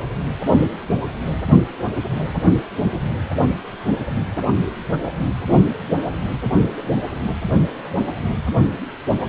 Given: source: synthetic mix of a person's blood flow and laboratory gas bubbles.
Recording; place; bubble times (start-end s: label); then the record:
Doppler ultrasound of blood flow; precordium
no bubbles
From the record:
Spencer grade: 0 (complete lack of bubble signals)